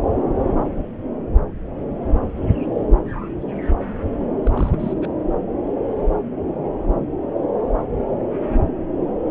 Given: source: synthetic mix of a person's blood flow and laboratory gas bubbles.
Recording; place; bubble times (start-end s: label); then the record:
Doppler ultrasound of blood flow; subclavian vein
4.43-5.06 s: bubbles
From the record:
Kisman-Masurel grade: 211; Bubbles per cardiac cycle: several, 3 to 8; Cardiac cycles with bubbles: 1 to 10%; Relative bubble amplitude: barely perceptible (0.100 to 0.250); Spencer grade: 1 (occasional bubble signal discernible with the cardiac motion signal, with majority of cardiac periods free of bubbles); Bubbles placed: anywhere in the cardiac cycle